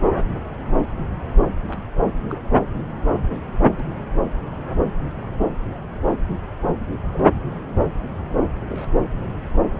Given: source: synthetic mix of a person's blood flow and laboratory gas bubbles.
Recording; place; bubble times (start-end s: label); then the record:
Doppler ultrasound of blood flow; subclavian vein
1.68-1.79 s: bubbles
1.95-2.02 s: bubbles
2.30-2.37 s: bubbles
3.78-3.83 s: bubbles
7.13-7.25 s: bubbles
8.61-9.00 s: bubbles
From the record:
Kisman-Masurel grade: 121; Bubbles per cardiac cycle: 1 to 2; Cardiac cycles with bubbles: 10 to 50%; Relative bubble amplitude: barely perceptible (0.100 to 0.250); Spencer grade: 2 (many but less than half of the cardiac periods contain bubble signals, singularly or in groups); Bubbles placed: anywhere in the cardiac cycle